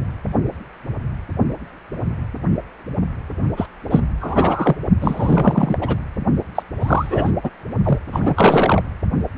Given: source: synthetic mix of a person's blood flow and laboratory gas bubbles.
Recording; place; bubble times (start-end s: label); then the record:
Doppler ultrasound of blood flow; precordium
3.56-3.66 s: bubbles
3.90-4.00 s: bubbles
4.20-4.76 s: bubbles
5.00-5.78 s: bubbles
5.80-5.95 s: bubbles
6.54-6.62 s: bubbles
6.80-7.31 s: bubbles
7.43-7.50 s: bubbles
7.83-7.99 s: bubbles
8.06-8.81 s: bubbles
From the record:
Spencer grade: 3 (all of the cardiac periods contain showers or single bubble signals, but not dominating or overriding the cardiac motion signals); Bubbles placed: only in the low amplitude regions of the cardiac cycle